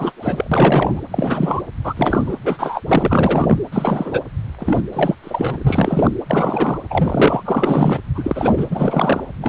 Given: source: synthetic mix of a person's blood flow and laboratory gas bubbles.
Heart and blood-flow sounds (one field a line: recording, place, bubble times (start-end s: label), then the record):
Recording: Doppler ultrasound of blood flow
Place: precordium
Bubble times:
0.00-0.12 s: bubbles
0.17-0.47 s: bubbles
0.52-1.01 s: bubbles
1.11-1.61 s: bubbles
1.84-1.94 s: bubbles
1.96-2.37 s: bubbles
2.43-2.82 s: bubbles
2.88-3.58 s: bubbles
3.72-4.21 s: bubbles
4.58-4.81 s: bubbles
4.93-5.15 s: bubbles
5.23-6.10 s: bubbles
6.29-6.79 s: bubbles
6.90-8.00 s: bubbles
8.15-9.23 s: bubbles
9.41-9.49 s: bubbles
From the record:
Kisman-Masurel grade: 343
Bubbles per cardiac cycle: rolling drumbeat, 9 or more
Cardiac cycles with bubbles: 100%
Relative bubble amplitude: loud (0.450 to 0.775)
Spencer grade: 3 (all of the cardiac periods contain showers or single bubble signals, but not dominating or overriding the cardiac motion signals)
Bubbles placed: anywhere in the cardiac cycle